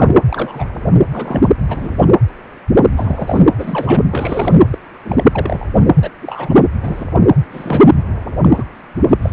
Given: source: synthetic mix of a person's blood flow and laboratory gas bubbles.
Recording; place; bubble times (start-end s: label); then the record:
Doppler ultrasound of blood flow; precordium
0.00-0.14 s: bubbles
0.27-0.67 s: bubbles
1.11-1.49 s: bubbles
1.68-1.97 s: bubbles
2.00-2.07 s: bubbles
2.96-3.43 s: bubbles
3.53-4.02 s: bubbles
4.11-4.54 s: bubbles
4.70-4.78 s: bubbles
5.04-5.24 s: bubbles
5.32-5.67 s: bubbles
6.01-6.09 s: bubbles
6.22-6.54 s: bubbles
6.75-7.05 s: bubbles
7.52-7.83 s: bubbles
8.42-8.64 s: bubbles
9.09-9.15 s: bubbles
9.22-9.33 s: bubbles
From the record:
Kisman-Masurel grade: 232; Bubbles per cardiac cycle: several, 3 to 8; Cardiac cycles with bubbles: 50 to 99%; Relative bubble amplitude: moderate (0.250 to 0.450); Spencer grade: 3 (all of the cardiac periods contain showers or single bubble signals, but not dominating or overriding the cardiac motion signals); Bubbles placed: anywhere in the cardiac cycle